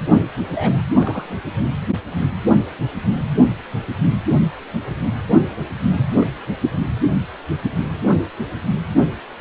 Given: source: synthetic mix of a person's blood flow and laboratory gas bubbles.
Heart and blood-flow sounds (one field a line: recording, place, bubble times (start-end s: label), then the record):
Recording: Doppler ultrasound of blood flow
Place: precordium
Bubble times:
0.54-0.83 s: bubbles
0.99-1.27 s: bubbles
5.90-6.07 s: bubbles
6.18-6.27 s: bubbles
From the record:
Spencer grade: 2 (many but less than half of the cardiac periods contain bubble signals, singularly or in groups)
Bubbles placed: only in the low amplitude regions of the cardiac cycle